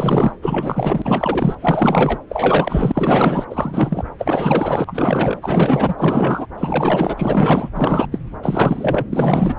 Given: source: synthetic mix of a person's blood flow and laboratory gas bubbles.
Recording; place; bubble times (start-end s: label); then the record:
Doppler ultrasound of blood flow; subclavian vein
0.00-0.32 s: bubbles
0.42-1.55 s: bubbles
1.61-2.18 s: bubbles
2.29-3.45 s: bubbles
3.50-4.03 s: bubbles
4.18-6.46 s: bubbles
6.57-7.69 s: bubbles
7.75-8.08 s: bubbles
8.11-8.19 s: bubbles
8.42-9.07 s: bubbles
9.12-9.55 s: bubbles
From the record:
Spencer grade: 4 (maximum detectable bubble signal sounding continuously throughout systole and diastole of every cardiac period, and overriding the amplitude of the normal cardiac signals); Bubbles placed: anywhere in the cardiac cycle